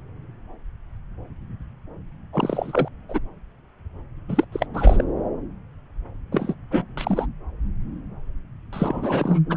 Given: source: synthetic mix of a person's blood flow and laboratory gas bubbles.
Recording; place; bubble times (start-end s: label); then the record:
Doppler ultrasound of blood flow; subclavian vein
2.32-2.88 s: bubbles
3.08-3.19 s: bubbles
4.28-4.45 s: bubbles
4.52-4.66 s: bubbles
4.74-5.04 s: bubbles
6.32-6.54 s: bubbles
6.70-7.26 s: bubbles
8.72-9.39 s: bubbles
9.49-9.57 s: bubbles
From the record:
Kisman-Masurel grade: 333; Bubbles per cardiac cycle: rolling drumbeat, 9 or more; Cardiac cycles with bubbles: 50 to 99%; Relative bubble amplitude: loud (0.450 to 0.775); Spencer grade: 3 (all of the cardiac periods contain showers or single bubble signals, but not dominating or overriding the cardiac motion signals); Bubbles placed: anywhere in the cardiac cycle